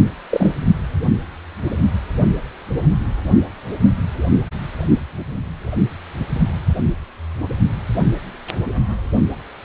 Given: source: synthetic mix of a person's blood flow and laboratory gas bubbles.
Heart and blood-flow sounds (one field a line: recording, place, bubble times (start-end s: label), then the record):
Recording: Doppler ultrasound of blood flow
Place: precordium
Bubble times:
0.30-0.51 s: bubbles
From the record:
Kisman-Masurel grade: 113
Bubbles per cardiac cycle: 1 to 2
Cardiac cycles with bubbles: 1 to 10%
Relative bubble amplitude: loud (0.450 to 0.775)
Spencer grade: 1 (occasional bubble signal discernible with the cardiac motion signal, with majority of cardiac periods free of bubbles)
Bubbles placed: only in the low amplitude regions of the cardiac cycle